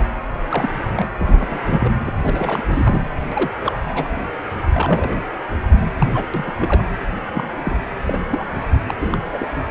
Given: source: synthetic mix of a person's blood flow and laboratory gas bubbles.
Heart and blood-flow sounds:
Doppler ultrasound of blood flow; precordium
0.49-0.69 s: bubbles
0.95-1.09 s: bubbles
1.19-1.88 s: bubbles
2.06-2.12 s: bubbles
2.23-2.62 s: bubbles
2.66-3.02 s: bubbles
3.31-3.50 s: bubbles
3.60-3.77 s: bubbles
3.88-4.09 s: bubbles
4.72-5.21 s: bubbles
6.00-6.07 s: bubbles
6.13-6.26 s: bubbles
6.33-6.53 s: bubbles
6.59-6.84 s: bubbles
7.33-7.47 s: bubbles
7.65-7.77 s: bubbles
8.05-8.21 s: bubbles
8.30-8.44 s: bubbles
8.88-8.95 s: bubbles
9.01-9.18 s: bubbles
9.33-9.54 s: bubbles
9.69-9.71 s: bubbles
From the record:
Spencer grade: 3 (all of the cardiac periods contain showers or single bubble signals, but not dominating or overriding the cardiac motion signals); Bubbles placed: anywhere in the cardiac cycle

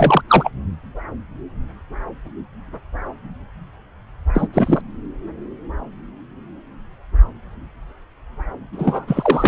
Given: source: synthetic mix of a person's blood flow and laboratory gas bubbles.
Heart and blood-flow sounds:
Doppler ultrasound of blood flow; subclavian vein
0.00-0.22 s: bubbles
0.29-0.51 s: bubbles
4.34-4.47 s: bubbles
4.52-4.81 s: bubbles
8.72-9.48 s: bubbles
From the record:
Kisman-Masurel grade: 223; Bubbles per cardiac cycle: several, 3 to 8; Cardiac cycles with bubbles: 10 to 50%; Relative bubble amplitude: loud (0.450 to 0.775); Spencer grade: 2 (many but less than half of the cardiac periods contain bubble signals, singularly or in groups); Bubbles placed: anywhere in the cardiac cycle

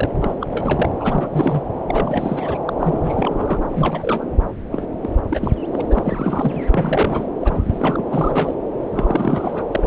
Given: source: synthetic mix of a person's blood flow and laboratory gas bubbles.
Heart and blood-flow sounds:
Doppler ultrasound of blood flow; subclavian vein
0.00-0.08 s: bubbles
0.20-0.33 s: bubbles
0.40-0.47 s: bubbles
0.49-0.89 s: bubbles
0.99-1.27 s: bubbles
1.31-1.62 s: bubbles
1.88-2.58 s: bubbles
2.65-2.73 s: bubbles
2.79-3.59 s: bubbles
3.71-4.25 s: bubbles
4.71-4.84 s: bubbles
5.01-5.09 s: bubbles
5.29-5.54 s: bubbles
5.72-5.81 s: bubbles
5.88-6.64 s: bubbles
6.71-7.26 s: bubbles
7.41-8.04 s: bubbles
8.10-8.54 s: bubbles
8.91-9.67 s: bubbles
9.72-9.87 s: bubbles
From the record:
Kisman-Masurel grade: 342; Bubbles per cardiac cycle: rolling drumbeat, 9 or more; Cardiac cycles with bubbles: 100%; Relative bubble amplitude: moderate (0.250 to 0.450); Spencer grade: 3 (all of the cardiac periods contain showers or single bubble signals, but not dominating or overriding the cardiac motion signals); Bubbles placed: anywhere in the cardiac cycle

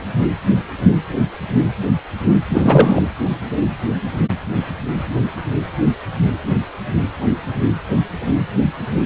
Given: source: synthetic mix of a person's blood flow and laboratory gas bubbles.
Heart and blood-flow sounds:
Doppler ultrasound of blood flow; precordium
2.49-3.02 s: bubbles
From the record:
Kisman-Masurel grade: 213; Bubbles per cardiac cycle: several, 3 to 8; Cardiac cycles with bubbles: 1 to 10%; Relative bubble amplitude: loud (0.450 to 0.775); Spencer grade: 1 (occasional bubble signal discernible with the cardiac motion signal, with majority of cardiac periods free of bubbles); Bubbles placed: anywhere in the cardiac cycle

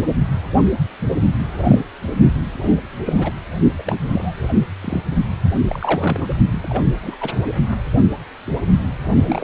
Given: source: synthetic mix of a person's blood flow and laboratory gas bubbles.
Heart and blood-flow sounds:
Doppler ultrasound of blood flow; precordium
1.52-1.81 s: bubbles
2.65-2.74 s: bubbles
3.05-3.31 s: bubbles
3.78-3.82 s: bubbles
3.87-3.98 s: bubbles
4.08-4.48 s: bubbles
4.81-5.02 s: bubbles
5.68-6.36 s: bubbles
6.52-6.60 s: bubbles
6.62-6.82 s: bubbles
7.03-7.16 s: bubbles
7.21-7.31 s: bubbles
7.45-7.53 s: bubbles
9.16-9.44 s: bubbles
From the record:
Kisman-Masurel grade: 232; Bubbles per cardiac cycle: several, 3 to 8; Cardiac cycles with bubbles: 50 to 99%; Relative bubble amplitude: moderate (0.250 to 0.450); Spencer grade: 3 (all of the cardiac periods contain showers or single bubble signals, but not dominating or overriding the cardiac motion signals); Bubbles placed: only in the low amplitude regions of the cardiac cycle

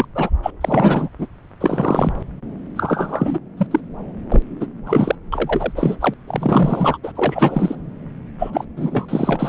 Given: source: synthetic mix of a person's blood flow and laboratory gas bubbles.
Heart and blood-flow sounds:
Doppler ultrasound of blood flow; subclavian vein
0.00-0.05 s: bubbles
0.15-0.30 s: bubbles
0.42-0.51 s: bubbles
0.61-1.09 s: bubbles
1.18-1.26 s: bubbles
1.60-2.12 s: bubbles
2.76-3.39 s: bubbles
3.57-3.67 s: bubbles
3.71-3.80 s: bubbles
4.31-4.42 s: bubbles
4.60-4.67 s: bubbles
4.85-5.15 s: bubbles
5.32-5.72 s: bubbles
5.76-5.96 s: bubbles
6.00-6.14 s: bubbles
6.26-6.97 s: bubbles
7.04-7.12 s: bubbles
7.15-7.75 s: bubbles
8.39-8.50 s: bubbles
8.53-8.64 s: bubbles
8.77-9.49 s: bubbles
From the record:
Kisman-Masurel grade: 343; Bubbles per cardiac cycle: rolling drumbeat, 9 or more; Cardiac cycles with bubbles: 100%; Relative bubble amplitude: loud (0.450 to 0.775); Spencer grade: 3 (all of the cardiac periods contain showers or single bubble signals, but not dominating or overriding the cardiac motion signals); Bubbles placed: anywhere in the cardiac cycle

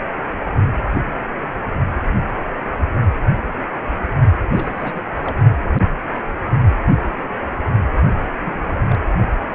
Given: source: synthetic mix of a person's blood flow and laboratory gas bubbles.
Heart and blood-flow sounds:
Doppler ultrasound of blood flow; precordium
4.50-5.01 s: bubbles
5.17-5.35 s: bubbles
8.45-8.53 s: bubbles
8.65-8.72 s: bubbles
8.88-8.99 s: bubbles
From the record:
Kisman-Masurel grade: 221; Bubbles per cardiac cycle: several, 3 to 8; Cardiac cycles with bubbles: 10 to 50%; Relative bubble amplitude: barely perceptible (0.100 to 0.250); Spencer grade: 2 (many but less than half of the cardiac periods contain bubble signals, singularly or in groups); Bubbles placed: only in the low amplitude regions of the cardiac cycle

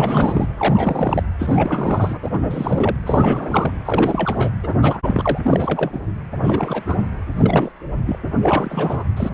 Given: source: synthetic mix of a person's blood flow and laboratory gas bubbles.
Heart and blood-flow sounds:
Doppler ultrasound of blood flow; precordium
0.00-0.48 s: bubbles
0.57-1.23 s: bubbles
1.39-2.18 s: bubbles
2.22-2.30 s: bubbles
2.33-2.96 s: bubbles
3.06-3.72 s: bubbles
3.84-4.50 s: bubbles
4.63-4.74 s: bubbles
4.81-4.98 s: bubbles
5.03-5.39 s: bubbles
5.44-5.91 s: bubbles
5.93-6.00 s: bubbles
6.42-6.83 s: bubbles
6.87-6.96 s: bubbles
7.34-7.72 s: bubbles
8.05-8.19 s: bubbles
8.42-9.04 s: bubbles
9.16-9.31 s: bubbles
From the record:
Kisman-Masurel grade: 343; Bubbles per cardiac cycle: rolling drumbeat, 9 or more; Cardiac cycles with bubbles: 100%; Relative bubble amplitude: loud (0.450 to 0.775); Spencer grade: 3 (all of the cardiac periods contain showers or single bubble signals, but not dominating or overriding the cardiac motion signals); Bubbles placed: anywhere in the cardiac cycle

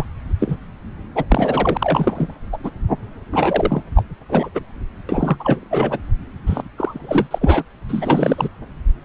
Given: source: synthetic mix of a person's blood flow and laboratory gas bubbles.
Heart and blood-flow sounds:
Doppler ultrasound of blood flow; subclavian vein
0.00-0.05 s: bubbles
0.40-0.57 s: bubbles
1.15-1.25 s: bubbles
1.29-2.33 s: bubbles
2.52-2.58 s: bubbles
2.63-2.71 s: bubbles
3.33-3.82 s: bubbles
3.94-4.03 s: bubbles
4.29-4.49 s: bubbles
4.54-4.60 s: bubbles
5.08-5.36 s: bubbles
5.39-5.98 s: bubbles
6.46-6.62 s: bubbles
6.76-7.27 s: bubbles
7.30-7.38 s: bubbles
7.41-7.63 s: bubbles
7.88-8.49 s: bubbles
From the record:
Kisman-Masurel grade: 333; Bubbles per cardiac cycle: rolling drumbeat, 9 or more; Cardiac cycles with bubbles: 50 to 99%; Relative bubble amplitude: loud (0.450 to 0.775); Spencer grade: 3 (all of the cardiac periods contain showers or single bubble signals, but not dominating or overriding the cardiac motion signals); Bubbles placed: anywhere in the cardiac cycle

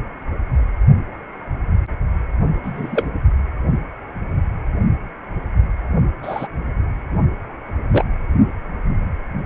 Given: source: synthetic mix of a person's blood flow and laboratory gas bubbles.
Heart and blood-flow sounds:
Doppler ultrasound of blood flow; precordium
2.63-3.08 s: bubbles
6.23-6.48 s: bubbles
7.92-8.04 s: bubbles
From the record:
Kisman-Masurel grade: 122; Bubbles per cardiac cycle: 1 to 2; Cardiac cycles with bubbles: 10 to 50%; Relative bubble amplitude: moderate (0.250 to 0.450); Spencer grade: 2 (many but less than half of the cardiac periods contain bubble signals, singularly or in groups); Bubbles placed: only in the low amplitude regions of the cardiac cycle

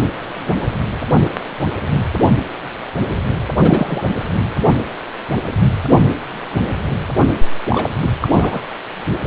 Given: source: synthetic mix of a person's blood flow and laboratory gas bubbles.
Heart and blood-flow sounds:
Doppler ultrasound of blood flow; precordium
3.59-4.04 s: bubbles
7.68-7.90 s: bubbles
8.02-8.07 s: bubbles
8.21-8.28 s: bubbles
8.33-8.62 s: bubbles
From the record:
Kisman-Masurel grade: 222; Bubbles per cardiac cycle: several, 3 to 8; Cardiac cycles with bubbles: 10 to 50%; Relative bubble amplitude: moderate (0.250 to 0.450); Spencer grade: 2 (many but less than half of the cardiac periods contain bubble signals, singularly or in groups); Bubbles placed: anywhere in the cardiac cycle

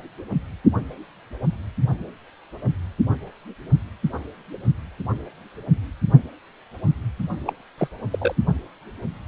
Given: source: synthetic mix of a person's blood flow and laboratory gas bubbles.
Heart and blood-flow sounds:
Doppler ultrasound of blood flow; precordium
7.46-7.53 s: bubbles
7.77-7.88 s: bubbles
8.11-8.35 s: bubbles
From the record:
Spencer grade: 1 (occasional bubble signal discernible with the cardiac motion signal, with majority of cardiac periods free of bubbles); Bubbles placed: only in the low amplitude regions of the cardiac cycle

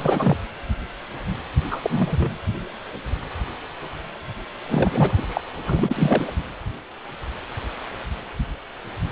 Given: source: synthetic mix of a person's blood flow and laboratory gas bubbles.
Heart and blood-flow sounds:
Doppler ultrasound of blood flow; precordium
0.00-0.37 s: bubbles
1.71-1.81 s: bubbles
1.84-2.30 s: bubbles
4.66-5.41 s: bubbles
5.66-6.31 s: bubbles
From the record:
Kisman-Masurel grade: 222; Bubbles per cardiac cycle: several, 3 to 8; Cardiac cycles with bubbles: 10 to 50%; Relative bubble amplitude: moderate (0.250 to 0.450); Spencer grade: 2 (many but less than half of the cardiac periods contain bubble signals, singularly or in groups); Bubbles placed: anywhere in the cardiac cycle

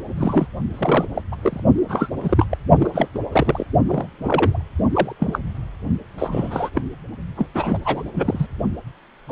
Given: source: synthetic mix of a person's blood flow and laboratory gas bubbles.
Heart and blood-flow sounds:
Doppler ultrasound of blood flow; precordium
0.17-0.47 s: bubbles
0.73-1.05 s: bubbles
1.14-1.22 s: bubbles
1.31-1.35 s: bubbles
1.42-1.60 s: bubbles
1.88-2.10 s: bubbles
2.21-2.46 s: bubbles
2.50-2.58 s: bubbles
2.75-2.90 s: bubbles
2.92-3.08 s: bubbles
3.14-3.19 s: bubbles
3.32-3.66 s: bubbles
3.87-4.63 s: bubbles
4.93-5.12 s: bubbles
5.19-5.38 s: bubbles
6.18-6.70 s: bubbles
6.75-6.82 s: bubbles
7.37-7.47 s: bubbles
7.54-7.79 s: bubbles
7.84-8.02 s: bubbles
8.14-8.47 s: bubbles
9.28-9.32 s: bubbles
From the record:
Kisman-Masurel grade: 242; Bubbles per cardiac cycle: several, 3 to 8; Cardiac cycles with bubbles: 100%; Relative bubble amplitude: moderate (0.250 to 0.450); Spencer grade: 3 (all of the cardiac periods contain showers or single bubble signals, but not dominating or overriding the cardiac motion signals); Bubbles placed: only in the low amplitude regions of the cardiac cycle

